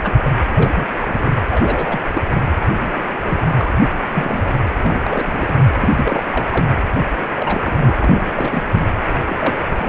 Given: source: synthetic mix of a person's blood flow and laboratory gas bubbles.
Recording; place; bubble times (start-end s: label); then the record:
Doppler ultrasound of blood flow; precordium
0.03-0.13 s: bubbles
0.24-0.30 s: bubbles
0.38-0.43 s: bubbles
0.54-0.86 s: bubbles
1.00-1.29 s: bubbles
1.50-2.01 s: bubbles
2.13-2.22 s: bubbles
2.63-3.02 s: bubbles
3.23-3.73 s: bubbles
4.13-4.54 s: bubbles
4.82-5.58 s: bubbles
5.79-6.23 s: bubbles
6.32-6.45 s: bubbles
6.52-6.67 s: bubbles
7.34-8.87 s: bubbles
9.27-9.55 s: bubbles
9.78-9.89 s: bubbles
From the record:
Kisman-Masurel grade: 242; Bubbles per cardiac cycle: several, 3 to 8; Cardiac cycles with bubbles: 100%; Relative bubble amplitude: moderate (0.250 to 0.450); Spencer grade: 3 (all of the cardiac periods contain showers or single bubble signals, but not dominating or overriding the cardiac motion signals); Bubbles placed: anywhere in the cardiac cycle